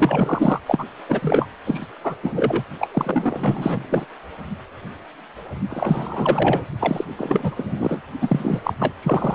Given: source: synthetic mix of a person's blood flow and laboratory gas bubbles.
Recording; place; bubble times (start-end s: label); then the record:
Doppler ultrasound of blood flow; precordium
0.00-0.60 s: bubbles
0.66-0.84 s: bubbles
1.08-1.46 s: bubbles
1.66-1.86 s: bubbles
2.04-2.15 s: bubbles
2.22-2.63 s: bubbles
2.80-2.87 s: bubbles
2.92-4.05 s: bubbles
5.71-6.65 s: bubbles
6.80-7.04 s: bubbles
7.18-8.01 s: bubbles
8.21-8.59 s: bubbles
8.64-8.74 s: bubbles
8.79-8.93 s: bubbles
9.03-9.35 s: bubbles
From the record:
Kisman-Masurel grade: 332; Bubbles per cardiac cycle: rolling drumbeat, 9 or more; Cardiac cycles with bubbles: 50 to 99%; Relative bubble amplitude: moderate (0.250 to 0.450); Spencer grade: 3 (all of the cardiac periods contain showers or single bubble signals, but not dominating or overriding the cardiac motion signals); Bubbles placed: only in the low amplitude regions of the cardiac cycle